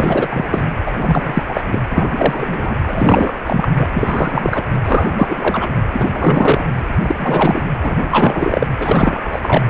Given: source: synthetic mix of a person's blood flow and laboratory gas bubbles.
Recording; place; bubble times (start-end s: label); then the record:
Doppler ultrasound of blood flow; precordium
0.00-0.28 s: bubbles
0.31-0.66 s: bubbles
0.85-0.93 s: bubbles
1.00-1.43 s: bubbles
1.48-1.64 s: bubbles
1.72-1.80 s: bubbles
1.92-2.76 s: bubbles
2.87-3.34 s: bubbles
3.47-3.69 s: bubbles
3.77-3.88 s: bubbles
3.95-4.66 s: bubbles
4.84-5.69 s: bubbles
5.92-6.67 s: bubbles
7.02-7.66 s: bubbles
7.82-7.96 s: bubbles
8.02-8.69 s: bubbles
8.81-9.39 s: bubbles
9.42-9.65 s: bubbles
From the record:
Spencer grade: 3 (all of the cardiac periods contain showers or single bubble signals, but not dominating or overriding the cardiac motion signals); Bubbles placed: anywhere in the cardiac cycle